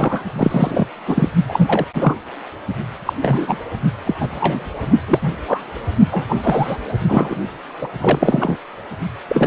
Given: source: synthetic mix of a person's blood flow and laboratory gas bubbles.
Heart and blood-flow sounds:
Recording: Doppler ultrasound of blood flow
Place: precordium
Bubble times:
0.00-0.23 s: bubbles
0.38-0.85 s: bubbles
1.07-1.28 s: bubbles
1.46-1.85 s: bubbles
1.95-2.16 s: bubbles
3.05-3.13 s: bubbles
3.23-3.58 s: bubbles
4.06-4.15 s: bubbles
4.19-4.29 s: bubbles
4.34-4.71 s: bubbles
5.08-5.30 s: bubbles
5.47-5.61 s: bubbles
6.11-6.25 s: bubbles
6.29-6.36 s: bubbles
6.41-6.78 s: bubbles
7.08-7.35 s: bubbles
7.81-7.88 s: bubbles
8.00-8.57 s: bubbles
9.29-9.47 s: bubbles
From the record:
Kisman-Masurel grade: 243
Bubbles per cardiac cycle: several, 3 to 8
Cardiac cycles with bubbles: 100%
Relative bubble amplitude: loud (0.450 to 0.775)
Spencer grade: 3 (all of the cardiac periods contain showers or single bubble signals, but not dominating or overriding the cardiac motion signals)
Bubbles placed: only in the low amplitude regions of the cardiac cycle

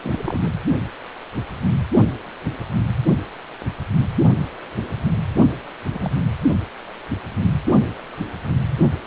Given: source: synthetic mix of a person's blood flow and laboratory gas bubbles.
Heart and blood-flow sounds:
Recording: Doppler ultrasound of blood flow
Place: precordium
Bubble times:
0.02-0.51 s: bubbles
5.93-6.12 s: bubbles
From the record:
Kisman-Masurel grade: 221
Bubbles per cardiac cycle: several, 3 to 8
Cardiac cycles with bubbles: 10 to 50%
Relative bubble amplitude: barely perceptible (0.100 to 0.250)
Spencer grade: 2 (many but less than half of the cardiac periods contain bubble signals, singularly or in groups)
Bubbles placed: only in the low amplitude regions of the cardiac cycle

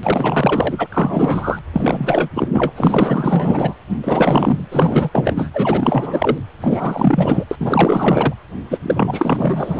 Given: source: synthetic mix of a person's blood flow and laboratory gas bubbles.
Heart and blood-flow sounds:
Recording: Doppler ultrasound of blood flow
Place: precordium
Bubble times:
0.03-0.88 s: bubbles
0.92-1.59 s: bubbles
1.72-2.29 s: bubbles
2.33-2.48 s: bubbles
2.52-2.72 s: bubbles
2.75-3.75 s: bubbles
3.89-3.99 s: bubbles
4.04-4.63 s: bubbles
4.71-5.10 s: bubbles
5.13-5.50 s: bubbles
5.54-6.38 s: bubbles
6.61-7.45 s: bubbles
7.51-7.55 s: bubbles
7.60-8.33 s: bubbles
8.71-8.78 s: bubbles
8.82-9.80 s: bubbles
From the record:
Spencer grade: 4 (maximum detectable bubble signal sounding continuously throughout systole and diastole of every cardiac period, and overriding the amplitude of the normal cardiac signals)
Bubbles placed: anywhere in the cardiac cycle

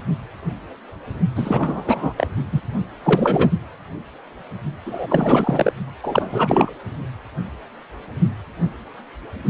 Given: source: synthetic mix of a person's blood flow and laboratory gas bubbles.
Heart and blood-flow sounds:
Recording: Doppler ultrasound of blood flow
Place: precordium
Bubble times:
1.35-2.14 s: bubbles
2.16-2.27 s: bubbles
2.52-2.62 s: bubbles
3.03-3.51 s: bubbles
4.84-5.72 s: bubbles
6.03-6.71 s: bubbles
From the record:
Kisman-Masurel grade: 333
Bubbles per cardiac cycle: rolling drumbeat, 9 or more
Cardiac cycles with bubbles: 50 to 99%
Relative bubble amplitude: loud (0.450 to 0.775)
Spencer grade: 3 (all of the cardiac periods contain showers or single bubble signals, but not dominating or overriding the cardiac motion signals)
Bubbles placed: only in the low amplitude regions of the cardiac cycle

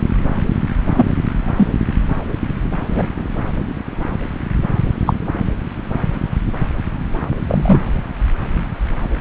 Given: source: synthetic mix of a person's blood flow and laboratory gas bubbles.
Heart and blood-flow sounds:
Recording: Doppler ultrasound of blood flow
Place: subclavian vein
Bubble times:
0.86-1.06 s: bubbles
1.57-1.68 s: bubbles
2.95-3.08 s: bubbles
5.06-5.14 s: bubbles
7.47-7.81 s: bubbles
From the record:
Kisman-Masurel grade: 123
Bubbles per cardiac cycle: 1 to 2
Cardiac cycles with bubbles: 10 to 50%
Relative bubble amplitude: loud (0.450 to 0.775)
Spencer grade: 2 (many but less than half of the cardiac periods contain bubble signals, singularly or in groups)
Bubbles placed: anywhere in the cardiac cycle

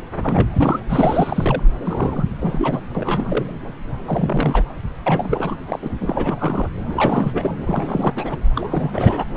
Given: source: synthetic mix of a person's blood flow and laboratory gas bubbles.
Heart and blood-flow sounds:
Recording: Doppler ultrasound of blood flow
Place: subclavian vein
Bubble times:
0.23-0.79 s: bubbles
0.89-1.63 s: bubbles
1.82-2.25 s: bubbles
2.40-2.80 s: bubbles
2.94-3.58 s: bubbles
4.06-4.63 s: bubbles
5.06-5.55 s: bubbles
5.66-5.79 s: bubbles
5.82-5.90 s: bubbles
6.01-6.69 s: bubbles
6.90-7.55 s: bubbles
7.66-8.13 s: bubbles
8.16-8.38 s: bubbles
8.55-9.24 s: bubbles
From the record:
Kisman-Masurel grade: 342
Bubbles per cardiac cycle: rolling drumbeat, 9 or more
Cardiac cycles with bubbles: 100%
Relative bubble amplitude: moderate (0.250 to 0.450)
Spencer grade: 3 (all of the cardiac periods contain showers or single bubble signals, but not dominating or overriding the cardiac motion signals)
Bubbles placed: anywhere in the cardiac cycle

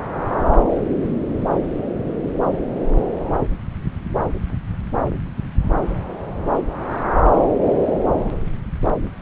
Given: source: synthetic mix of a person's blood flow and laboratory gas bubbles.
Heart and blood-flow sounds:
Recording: Doppler ultrasound of blood flow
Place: subclavian vein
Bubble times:
no bubbles
From the record:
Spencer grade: 0 (complete lack of bubble signals)

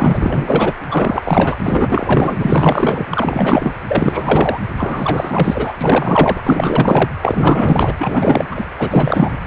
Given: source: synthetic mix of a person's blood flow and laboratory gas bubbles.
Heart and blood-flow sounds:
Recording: Doppler ultrasound of blood flow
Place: precordium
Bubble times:
0.00-0.73 s: bubbles
0.90-1.58 s: bubbles
1.63-2.37 s: bubbles
2.40-3.06 s: bubbles
3.10-3.72 s: bubbles
3.88-4.60 s: bubbles
4.79-5.73 s: bubbles
5.80-6.41 s: bubbles
6.44-7.09 s: bubbles
7.22-7.94 s: bubbles
7.99-8.46 s: bubbles
8.51-8.67 s: bubbles
8.78-9.39 s: bubbles
From the record:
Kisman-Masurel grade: 444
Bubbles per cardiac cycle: continuous sound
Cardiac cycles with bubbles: 100%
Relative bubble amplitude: maximal (0.775 to 0.999)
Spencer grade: 4 (maximum detectable bubble signal sounding continuously throughout systole and diastole of every cardiac period, and overriding the amplitude of the normal cardiac signals)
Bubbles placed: anywhere in the cardiac cycle

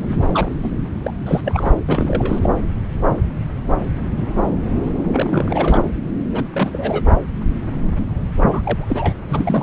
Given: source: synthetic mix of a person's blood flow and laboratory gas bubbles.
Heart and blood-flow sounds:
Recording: Doppler ultrasound of blood flow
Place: subclavian vein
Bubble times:
0.14-0.23 s: bubbles
0.27-0.55 s: bubbles
0.62-0.76 s: bubbles
1.02-1.12 s: bubbles
1.25-1.41 s: bubbles
1.44-1.72 s: bubbles
1.86-2.40 s: bubbles
2.42-2.50 s: bubbles
5.12-5.80 s: bubbles
6.31-6.44 s: bubbles
6.53-7.04 s: bubbles
8.52-9.15 s: bubbles
9.29-9.63 s: bubbles
From the record:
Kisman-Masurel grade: 232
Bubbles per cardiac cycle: several, 3 to 8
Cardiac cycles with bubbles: 50 to 99%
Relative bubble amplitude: moderate (0.250 to 0.450)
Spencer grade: 3 (all of the cardiac periods contain showers or single bubble signals, but not dominating or overriding the cardiac motion signals)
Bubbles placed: anywhere in the cardiac cycle

